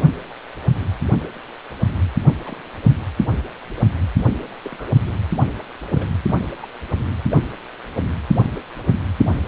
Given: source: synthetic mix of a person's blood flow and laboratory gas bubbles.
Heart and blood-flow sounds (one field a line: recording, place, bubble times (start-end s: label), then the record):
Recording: Doppler ultrasound of blood flow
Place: precordium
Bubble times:
2.46-2.62 s: bubbles
4.63-4.99 s: bubbles
5.94-6.08 s: bubbles
6.62-6.65 s: bubbles
7.29-7.41 s: bubbles
From the record:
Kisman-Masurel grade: 121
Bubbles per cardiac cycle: 1 to 2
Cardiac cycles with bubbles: 10 to 50%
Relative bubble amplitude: barely perceptible (0.100 to 0.250)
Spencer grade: 2 (many but less than half of the cardiac periods contain bubble signals, singularly or in groups)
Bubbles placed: anywhere in the cardiac cycle